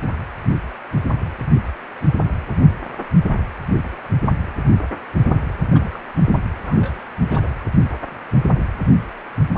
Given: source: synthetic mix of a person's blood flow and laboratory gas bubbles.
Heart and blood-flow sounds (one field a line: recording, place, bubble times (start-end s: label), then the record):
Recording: Doppler ultrasound of blood flow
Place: precordium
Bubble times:
5.69-6.00 s: bubbles
6.24-6.38 s: bubbles
6.65-7.03 s: bubbles
7.27-7.49 s: bubbles
From the record:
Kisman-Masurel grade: 221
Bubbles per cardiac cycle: several, 3 to 8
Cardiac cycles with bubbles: 10 to 50%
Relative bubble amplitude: barely perceptible (0.100 to 0.250)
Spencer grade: 2 (many but less than half of the cardiac periods contain bubble signals, singularly or in groups)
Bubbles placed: anywhere in the cardiac cycle